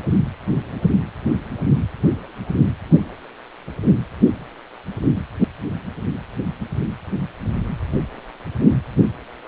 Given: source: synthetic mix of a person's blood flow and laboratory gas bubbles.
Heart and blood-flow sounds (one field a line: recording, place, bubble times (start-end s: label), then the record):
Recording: Doppler ultrasound of blood flow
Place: precordium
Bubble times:
5.41-5.47 s: bubbles
From the record:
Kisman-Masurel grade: 112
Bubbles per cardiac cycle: 1 to 2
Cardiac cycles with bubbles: 1 to 10%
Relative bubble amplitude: moderate (0.250 to 0.450)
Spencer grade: 1 (occasional bubble signal discernible with the cardiac motion signal, with majority of cardiac periods free of bubbles)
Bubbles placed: anywhere in the cardiac cycle